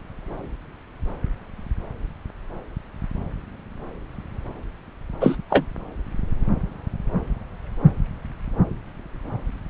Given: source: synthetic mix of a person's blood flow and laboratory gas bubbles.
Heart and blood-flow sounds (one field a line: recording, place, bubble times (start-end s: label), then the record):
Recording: Doppler ultrasound of blood flow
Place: subclavian vein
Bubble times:
5.21-5.38 s: bubbles
5.50-5.65 s: bubbles
From the record:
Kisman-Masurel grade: 213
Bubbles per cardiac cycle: several, 3 to 8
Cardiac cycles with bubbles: 1 to 10%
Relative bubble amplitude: loud (0.450 to 0.775)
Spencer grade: 1 (occasional bubble signal discernible with the cardiac motion signal, with majority of cardiac periods free of bubbles)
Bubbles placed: anywhere in the cardiac cycle